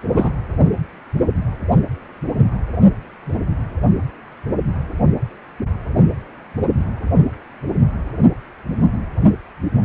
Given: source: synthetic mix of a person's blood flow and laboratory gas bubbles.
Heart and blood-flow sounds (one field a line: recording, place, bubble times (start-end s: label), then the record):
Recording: Doppler ultrasound of blood flow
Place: precordium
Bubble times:
0.08-0.33 s: bubbles
From the record:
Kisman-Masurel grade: 212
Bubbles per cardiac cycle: several, 3 to 8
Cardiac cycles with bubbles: 1 to 10%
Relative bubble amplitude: moderate (0.250 to 0.450)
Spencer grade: 1 (occasional bubble signal discernible with the cardiac motion signal, with majority of cardiac periods free of bubbles)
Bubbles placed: anywhere in the cardiac cycle